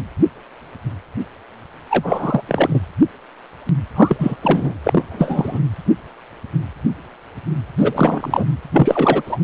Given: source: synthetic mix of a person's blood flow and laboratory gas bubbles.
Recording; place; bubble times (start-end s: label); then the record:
Doppler ultrasound of blood flow; precordium
1.90-2.42 s: bubbles
2.47-2.80 s: bubbles
3.96-4.37 s: bubbles
4.42-4.73 s: bubbles
4.83-5.59 s: bubbles
7.78-8.45 s: bubbles
8.72-9.22 s: bubbles
9.26-9.38 s: bubbles
From the record:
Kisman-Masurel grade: 333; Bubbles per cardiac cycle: rolling drumbeat, 9 or more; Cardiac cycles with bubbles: 50 to 99%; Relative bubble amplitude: loud (0.450 to 0.775); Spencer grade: 3 (all of the cardiac periods contain showers or single bubble signals, but not dominating or overriding the cardiac motion signals); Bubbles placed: anywhere in the cardiac cycle